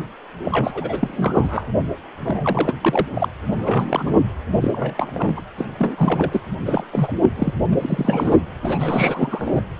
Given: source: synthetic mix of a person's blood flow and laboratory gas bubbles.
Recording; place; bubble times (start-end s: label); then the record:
Doppler ultrasound of blood flow; precordium
0.44-1.66 s: bubbles
2.20-2.74 s: bubbles
2.83-3.06 s: bubbles
3.14-3.29 s: bubbles
3.51-4.20 s: bubbles
4.53-4.58 s: bubbles
4.61-5.42 s: bubbles
5.57-5.66 s: bubbles
5.78-6.40 s: bubbles
6.65-6.83 s: bubbles
6.92-7.12 s: bubbles
7.22-7.29 s: bubbles
7.37-7.52 s: bubbles
7.70-8.38 s: bubbles
8.62-9.61 s: bubbles
From the record:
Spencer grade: 3 (all of the cardiac periods contain showers or single bubble signals, but not dominating or overriding the cardiac motion signals); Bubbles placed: anywhere in the cardiac cycle